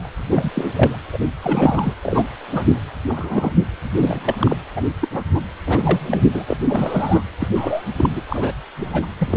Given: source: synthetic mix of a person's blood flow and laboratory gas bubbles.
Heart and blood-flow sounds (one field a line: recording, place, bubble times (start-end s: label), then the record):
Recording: Doppler ultrasound of blood flow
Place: precordium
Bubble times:
0.00-0.09 s: bubbles
0.31-0.51 s: bubbles
0.54-0.98 s: bubbles
1.12-1.18 s: bubbles
1.42-1.94 s: bubbles
2.02-2.27 s: bubbles
2.51-2.64 s: bubbles
3.07-3.52 s: bubbles
3.96-4.35 s: bubbles
4.39-4.57 s: bubbles
4.76-4.83 s: bubbles
5.00-5.08 s: bubbles
5.11-5.23 s: bubbles
5.35-5.41 s: bubbles
5.66-6.25 s: bubbles
6.34-6.45 s: bubbles
6.48-6.57 s: bubbles
6.69-7.23 s: bubbles
7.39-7.48 s: bubbles
7.54-7.82 s: bubbles
7.98-8.21 s: bubbles
8.29-8.52 s: bubbles
8.78-9.06 s: bubbles
9.17-9.37 s: bubbles
From the record:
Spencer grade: 3 (all of the cardiac periods contain showers or single bubble signals, but not dominating or overriding the cardiac motion signals)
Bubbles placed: anywhere in the cardiac cycle